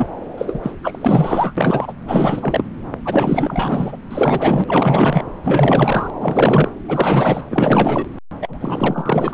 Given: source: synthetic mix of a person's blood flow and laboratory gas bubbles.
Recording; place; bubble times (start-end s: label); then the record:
Doppler ultrasound of blood flow; subclavian vein
0.00-0.07 s: bubbles
0.38-0.71 s: bubbles
0.83-1.53 s: bubbles
1.57-1.93 s: bubbles
2.08-2.65 s: bubbles
3.04-3.97 s: bubbles
4.11-4.64 s: bubbles
4.67-5.23 s: bubbles
5.43-6.10 s: bubbles
6.21-6.70 s: bubbles
6.88-7.43 s: bubbles
7.50-8.06 s: bubbles
8.41-9.34 s: bubbles
From the record:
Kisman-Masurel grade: 444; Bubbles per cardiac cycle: continuous sound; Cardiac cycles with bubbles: 100%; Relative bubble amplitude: maximal (0.775 to 0.999); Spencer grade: 4 (maximum detectable bubble signal sounding continuously throughout systole and diastole of every cardiac period, and overriding the amplitude of the normal cardiac signals); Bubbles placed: anywhere in the cardiac cycle